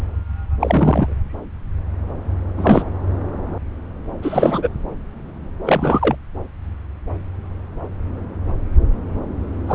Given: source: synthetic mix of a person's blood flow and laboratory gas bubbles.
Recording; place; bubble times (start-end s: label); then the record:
Doppler ultrasound of blood flow; subclavian vein
0.60-1.14 s: bubbles
2.57-2.83 s: bubbles
4.22-4.70 s: bubbles
5.63-6.16 s: bubbles
9.67-9.74 s: bubbles
From the record:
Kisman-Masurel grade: 223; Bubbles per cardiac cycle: several, 3 to 8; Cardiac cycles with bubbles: 10 to 50%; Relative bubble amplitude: loud (0.450 to 0.775); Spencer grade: 2 (many but less than half of the cardiac periods contain bubble signals, singularly or in groups); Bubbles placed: anywhere in the cardiac cycle